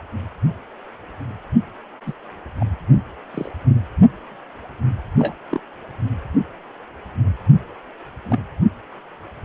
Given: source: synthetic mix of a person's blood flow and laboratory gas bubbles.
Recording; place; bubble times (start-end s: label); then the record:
Doppler ultrasound of blood flow; precordium
2.06-2.12 s: bubbles
2.60-2.65 s: bubbles
3.34-3.52 s: bubbles
5.19-5.34 s: bubbles
5.51-5.60 s: bubbles
8.30-8.39 s: bubbles
From the record:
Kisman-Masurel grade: 122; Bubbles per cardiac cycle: 1 to 2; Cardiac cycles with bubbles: 10 to 50%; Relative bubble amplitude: moderate (0.250 to 0.450); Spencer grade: 2 (many but less than half of the cardiac periods contain bubble signals, singularly or in groups); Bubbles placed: only in the low amplitude regions of the cardiac cycle